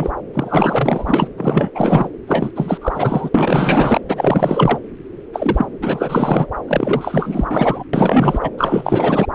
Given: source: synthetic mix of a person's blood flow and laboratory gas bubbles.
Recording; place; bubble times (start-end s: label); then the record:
Doppler ultrasound of blood flow; subclavian vein
0.00-0.10 s: bubbles
0.33-1.27 s: bubbles
1.38-1.71 s: bubbles
1.75-2.08 s: bubbles
2.27-2.51 s: bubbles
2.55-2.78 s: bubbles
2.82-3.30 s: bubbles
3.34-4.00 s: bubbles
4.08-4.79 s: bubbles
5.33-5.66 s: bubbles
5.81-6.46 s: bubbles
6.67-7.85 s: bubbles
7.93-8.49 s: bubbles
8.57-9.27 s: bubbles
From the record:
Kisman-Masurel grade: 444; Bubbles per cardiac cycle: continuous sound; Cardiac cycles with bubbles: 100%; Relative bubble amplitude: maximal (0.775 to 0.999); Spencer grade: 4 (maximum detectable bubble signal sounding continuously throughout systole and diastole of every cardiac period, and overriding the amplitude of the normal cardiac signals); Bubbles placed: anywhere in the cardiac cycle